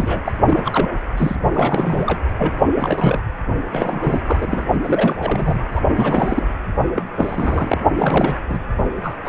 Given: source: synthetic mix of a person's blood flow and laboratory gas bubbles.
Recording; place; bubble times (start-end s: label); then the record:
Doppler ultrasound of blood flow; precordium
0.00-0.22 s: bubbles
0.24-0.32 s: bubbles
0.46-0.94 s: bubbles
1.17-1.35 s: bubbles
1.53-2.20 s: bubbles
2.38-2.53 s: bubbles
2.74-3.21 s: bubbles
3.72-4.21 s: bubbles
4.25-4.66 s: bubbles
4.71-4.79 s: bubbles
4.83-5.58 s: bubbles
5.71-5.80 s: bubbles
5.94-6.46 s: bubbles
6.93-7.06 s: bubbles
7.17-7.81 s: bubbles
7.93-8.38 s: bubbles
8.50-8.60 s: bubbles
9.03-9.16 s: bubbles
9.25-9.29 s: bubbles
From the record:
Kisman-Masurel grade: 342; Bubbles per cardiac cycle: rolling drumbeat, 9 or more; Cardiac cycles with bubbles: 100%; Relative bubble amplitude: moderate (0.250 to 0.450); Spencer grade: 3 (all of the cardiac periods contain showers or single bubble signals, but not dominating or overriding the cardiac motion signals); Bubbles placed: only in the low amplitude regions of the cardiac cycle